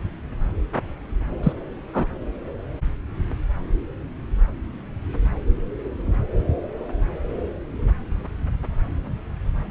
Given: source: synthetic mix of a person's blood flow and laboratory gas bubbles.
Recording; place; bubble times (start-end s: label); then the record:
Doppler ultrasound of blood flow; subclavian vein
1.43-1.53 s: bubbles
1.94-2.06 s: bubbles
From the record:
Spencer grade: 1 (occasional bubble signal discernible with the cardiac motion signal, with majority of cardiac periods free of bubbles); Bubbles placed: anywhere in the cardiac cycle